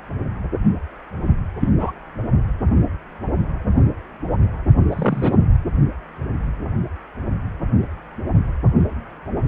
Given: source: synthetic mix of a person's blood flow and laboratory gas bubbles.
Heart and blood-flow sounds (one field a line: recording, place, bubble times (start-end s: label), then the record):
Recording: Doppler ultrasound of blood flow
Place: precordium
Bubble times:
1.59-1.69 s: bubbles
1.79-1.92 s: bubbles
4.89-5.36 s: bubbles
From the record:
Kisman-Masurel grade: 122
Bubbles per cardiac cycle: 1 to 2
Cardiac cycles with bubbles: 10 to 50%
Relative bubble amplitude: moderate (0.250 to 0.450)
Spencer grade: 2 (many but less than half of the cardiac periods contain bubble signals, singularly or in groups)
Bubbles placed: only in the low amplitude regions of the cardiac cycle